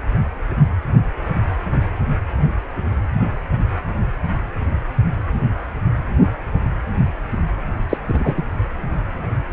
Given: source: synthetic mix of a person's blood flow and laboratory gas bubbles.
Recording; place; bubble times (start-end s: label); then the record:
Doppler ultrasound of blood flow; precordium
7.89-7.97 s: bubbles
8.07-8.34 s: bubbles
8.37-8.43 s: bubbles
From the record:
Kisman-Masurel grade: 213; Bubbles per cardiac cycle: several, 3 to 8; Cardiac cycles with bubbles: 1 to 10%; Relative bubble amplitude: loud (0.450 to 0.775); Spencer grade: 1 (occasional bubble signal discernible with the cardiac motion signal, with majority of cardiac periods free of bubbles); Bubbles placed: anywhere in the cardiac cycle